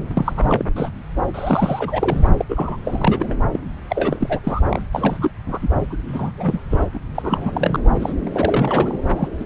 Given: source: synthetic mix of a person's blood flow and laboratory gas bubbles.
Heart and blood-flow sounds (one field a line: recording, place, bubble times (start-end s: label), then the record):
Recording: Doppler ultrasound of blood flow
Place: subclavian vein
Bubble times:
0.00-0.65 s: bubbles
0.76-0.90 s: bubbles
1.34-2.29 s: bubbles
2.40-2.45 s: bubbles
2.49-2.77 s: bubbles
2.84-3.34 s: bubbles
3.52-3.59 s: bubbles
3.88-4.39 s: bubbles
4.43-4.60 s: bubbles
4.70-4.81 s: bubbles
4.92-5.30 s: bubbles
5.46-5.58 s: bubbles
5.62-5.68 s: bubbles
5.90-5.97 s: bubbles
6.07-6.31 s: bubbles
6.38-6.62 s: bubbles
6.70-6.85 s: bubbles
6.93-7.00 s: bubbles
7.14-7.80 s: bubbles
7.90-8.12 s: bubbles
8.27-9.11 s: bubbles
9.15-9.28 s: bubbles
9.39-9.45 s: bubbles
From the record:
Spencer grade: 3 (all of the cardiac periods contain showers or single bubble signals, but not dominating or overriding the cardiac motion signals)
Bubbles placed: anywhere in the cardiac cycle